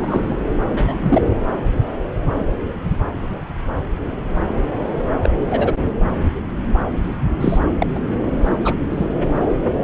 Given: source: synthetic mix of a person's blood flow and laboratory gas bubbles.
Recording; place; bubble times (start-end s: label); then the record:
Doppler ultrasound of blood flow; subclavian vein
0.00-0.37 s: bubbles
0.72-1.31 s: bubbles
5.23-5.29 s: bubbles
5.51-5.75 s: bubbles
7.40-7.58 s: bubbles
7.82-7.87 s: bubbles
7.94-8.00 s: bubbles
8.65-8.75 s: bubbles
8.88-9.06 s: bubbles
From the record:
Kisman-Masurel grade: 122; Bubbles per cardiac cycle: 1 to 2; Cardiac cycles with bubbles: 10 to 50%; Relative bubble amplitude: moderate (0.250 to 0.450); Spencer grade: 2 (many but less than half of the cardiac periods contain bubble signals, singularly or in groups); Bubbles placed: anywhere in the cardiac cycle